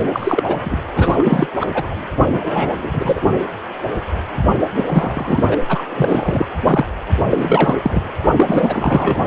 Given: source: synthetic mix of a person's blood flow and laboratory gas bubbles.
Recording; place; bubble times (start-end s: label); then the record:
Doppler ultrasound of blood flow; precordium
0.00-0.09 s: bubbles
0.13-0.56 s: bubbles
0.64-0.79 s: bubbles
0.96-1.48 s: bubbles
1.60-1.67 s: bubbles
1.74-1.95 s: bubbles
2.30-3.20 s: bubbles
4.77-5.57 s: bubbles
5.69-5.82 s: bubbles
5.90-6.46 s: bubbles
6.66-6.86 s: bubbles
7.30-7.79 s: bubbles
7.82-8.02 s: bubbles
8.36-9.25 s: bubbles
From the record:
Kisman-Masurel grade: 333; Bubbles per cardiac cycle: rolling drumbeat, 9 or more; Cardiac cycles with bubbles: 50 to 99%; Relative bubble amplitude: loud (0.450 to 0.775); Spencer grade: 3 (all of the cardiac periods contain showers or single bubble signals, but not dominating or overriding the cardiac motion signals); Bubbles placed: anywhere in the cardiac cycle